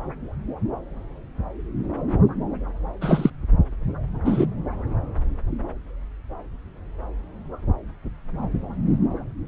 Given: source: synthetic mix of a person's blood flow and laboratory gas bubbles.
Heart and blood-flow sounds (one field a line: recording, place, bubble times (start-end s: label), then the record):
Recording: Doppler ultrasound of blood flow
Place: subclavian vein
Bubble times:
3.01-3.30 s: bubbles
4.25-4.47 s: bubbles
From the record:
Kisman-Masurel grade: 123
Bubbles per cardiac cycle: 1 to 2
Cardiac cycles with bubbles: 10 to 50%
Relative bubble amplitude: loud (0.450 to 0.775)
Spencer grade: 2 (many but less than half of the cardiac periods contain bubble signals, singularly or in groups)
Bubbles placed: anywhere in the cardiac cycle